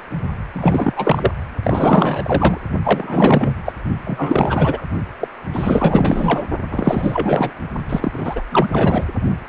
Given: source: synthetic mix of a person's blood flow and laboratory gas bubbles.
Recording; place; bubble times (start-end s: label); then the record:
Doppler ultrasound of blood flow; precordium
0.00-0.03 s: bubbles
0.53-1.31 s: bubbles
1.63-2.57 s: bubbles
2.83-3.56 s: bubbles
3.65-3.73 s: bubbles
4.04-4.82 s: bubbles
5.20-5.28 s: bubbles
5.54-6.44 s: bubbles
6.71-7.52 s: bubbles
7.89-8.43 s: bubbles
8.51-9.04 s: bubbles
9.46-9.49 s: bubbles
From the record:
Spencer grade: 4 (maximum detectable bubble signal sounding continuously throughout systole and diastole of every cardiac period, and overriding the amplitude of the normal cardiac signals); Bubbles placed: only in the low amplitude regions of the cardiac cycle